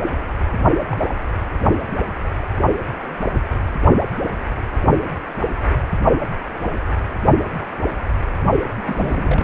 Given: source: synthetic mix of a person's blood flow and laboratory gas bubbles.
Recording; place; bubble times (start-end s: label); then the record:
Doppler ultrasound of blood flow; precordium
0.91-1.15 s: bubbles
8.74-9.44 s: bubbles
From the record:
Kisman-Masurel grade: 221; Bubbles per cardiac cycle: several, 3 to 8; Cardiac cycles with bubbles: 10 to 50%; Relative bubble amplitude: barely perceptible (0.100 to 0.250); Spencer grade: 2 (many but less than half of the cardiac periods contain bubble signals, singularly or in groups); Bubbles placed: only in the low amplitude regions of the cardiac cycle